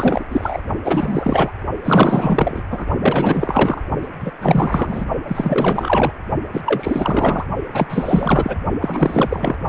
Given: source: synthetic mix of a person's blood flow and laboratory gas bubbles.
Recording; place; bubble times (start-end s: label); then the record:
Doppler ultrasound of blood flow; precordium
0.00-0.25 s: bubbles
0.29-0.62 s: bubbles
0.83-1.52 s: bubbles
1.84-2.64 s: bubbles
2.70-2.87 s: bubbles
3.01-3.81 s: bubbles
4.01-4.08 s: bubbles
4.21-4.31 s: bubbles
4.41-5.05 s: bubbles
5.27-6.12 s: bubbles
6.53-6.61 s: bubbles
6.65-7.45 s: bubbles
7.71-8.57 s: bubbles
8.81-9.57 s: bubbles
From the record:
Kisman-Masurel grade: 444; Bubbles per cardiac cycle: continuous sound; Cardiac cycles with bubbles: 100%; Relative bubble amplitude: maximal (0.775 to 0.999); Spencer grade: 4 (maximum detectable bubble signal sounding continuously throughout systole and diastole of every cardiac period, and overriding the amplitude of the normal cardiac signals); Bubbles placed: only in the low amplitude regions of the cardiac cycle